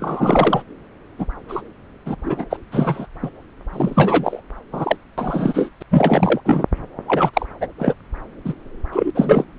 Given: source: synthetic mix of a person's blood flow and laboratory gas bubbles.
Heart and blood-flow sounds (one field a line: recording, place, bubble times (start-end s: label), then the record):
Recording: Doppler ultrasound of blood flow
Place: subclavian vein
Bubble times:
0.00-0.62 s: bubbles
1.18-1.25 s: bubbles
1.48-1.61 s: bubbles
2.06-2.15 s: bubbles
2.24-2.44 s: bubbles
2.50-2.57 s: bubbles
2.71-3.06 s: bubbles
3.23-3.30 s: bubbles
3.72-4.42 s: bubbles
4.72-4.97 s: bubbles
5.17-5.68 s: bubbles
5.80-5.83 s: bubbles
5.91-6.41 s: bubbles
6.45-6.64 s: bubbles
7.08-7.30 s: bubbles
7.33-7.46 s: bubbles
7.60-7.67 s: bubbles
7.78-7.93 s: bubbles
8.45-8.53 s: bubbles
8.92-9.11 s: bubbles
9.15-9.45 s: bubbles
From the record:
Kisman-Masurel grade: 243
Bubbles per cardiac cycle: several, 3 to 8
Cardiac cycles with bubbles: 100%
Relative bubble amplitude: loud (0.450 to 0.775)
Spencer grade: 3 (all of the cardiac periods contain showers or single bubble signals, but not dominating or overriding the cardiac motion signals)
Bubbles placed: anywhere in the cardiac cycle